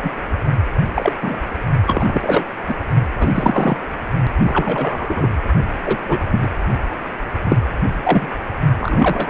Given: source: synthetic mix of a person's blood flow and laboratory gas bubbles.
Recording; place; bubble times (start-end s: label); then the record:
Doppler ultrasound of blood flow; precordium
0.02-0.11 s: bubbles
0.94-1.12 s: bubbles
1.22-1.40 s: bubbles
1.84-2.45 s: bubbles
2.67-2.74 s: bubbles
3.19-3.79 s: bubbles
4.39-5.27 s: bubbles
5.85-5.97 s: bubbles
6.08-6.18 s: bubbles
6.31-6.39 s: bubbles
6.42-6.47 s: bubbles
7.43-7.56 s: bubbles
8.04-8.29 s: bubbles
8.80-9.30 s: bubbles
From the record:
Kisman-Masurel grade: 233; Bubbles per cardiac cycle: several, 3 to 8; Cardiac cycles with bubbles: 50 to 99%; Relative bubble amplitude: loud (0.450 to 0.775); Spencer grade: 3 (all of the cardiac periods contain showers or single bubble signals, but not dominating or overriding the cardiac motion signals); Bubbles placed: only in the low amplitude regions of the cardiac cycle